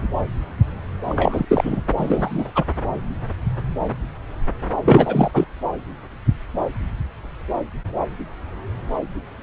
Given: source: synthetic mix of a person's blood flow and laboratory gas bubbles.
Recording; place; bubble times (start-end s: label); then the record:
Doppler ultrasound of blood flow; subclavian vein
1.04-1.46 s: bubbles
1.49-1.81 s: bubbles
1.96-2.52 s: bubbles
2.55-2.64 s: bubbles
4.85-5.45 s: bubbles
From the record:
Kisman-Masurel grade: 223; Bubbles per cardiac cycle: several, 3 to 8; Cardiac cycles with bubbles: 10 to 50%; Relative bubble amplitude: loud (0.450 to 0.775); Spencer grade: 2 (many but less than half of the cardiac periods contain bubble signals, singularly or in groups); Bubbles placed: anywhere in the cardiac cycle